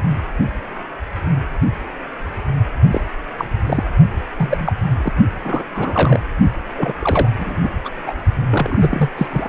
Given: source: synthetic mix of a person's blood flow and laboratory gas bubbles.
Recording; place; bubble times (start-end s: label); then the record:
Doppler ultrasound of blood flow; precordium
2.92-3.01 s: bubbles
3.38-3.45 s: bubbles
3.66-3.84 s: bubbles
4.38-4.73 s: bubbles
4.97-5.12 s: bubbles
5.44-5.63 s: bubbles
5.74-6.20 s: bubbles
6.77-6.94 s: bubbles
6.99-7.29 s: bubbles
7.38-7.70 s: bubbles
7.84-7.90 s: bubbles
8.06-8.13 s: bubbles
8.49-9.10 s: bubbles
9.16-9.27 s: bubbles
9.30-9.49 s: bubbles
From the record:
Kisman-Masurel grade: 232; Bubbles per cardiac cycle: several, 3 to 8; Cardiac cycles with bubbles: 50 to 99%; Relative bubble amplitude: moderate (0.250 to 0.450); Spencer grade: 3 (all of the cardiac periods contain showers or single bubble signals, but not dominating or overriding the cardiac motion signals); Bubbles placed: only in the low amplitude regions of the cardiac cycle